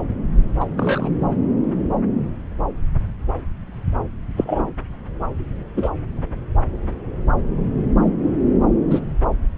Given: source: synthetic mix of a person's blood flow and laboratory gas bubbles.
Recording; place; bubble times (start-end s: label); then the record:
Doppler ultrasound of blood flow; subclavian vein
0.60-0.65 s: bubbles
0.78-1.09 s: bubbles
4.37-4.65 s: bubbles
5.77-5.90 s: bubbles
8.90-9.00 s: bubbles
From the record:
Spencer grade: 2 (many but less than half of the cardiac periods contain bubble signals, singularly or in groups); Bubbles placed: anywhere in the cardiac cycle